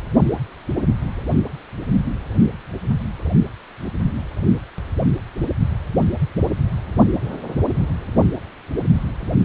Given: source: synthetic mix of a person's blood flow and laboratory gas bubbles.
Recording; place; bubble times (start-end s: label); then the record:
Doppler ultrasound of blood flow; precordium
no bubbles
From the record:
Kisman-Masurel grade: 000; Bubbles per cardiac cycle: 0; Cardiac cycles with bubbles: 0%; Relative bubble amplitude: no bubbles discernible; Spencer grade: 0 (complete lack of bubble signals)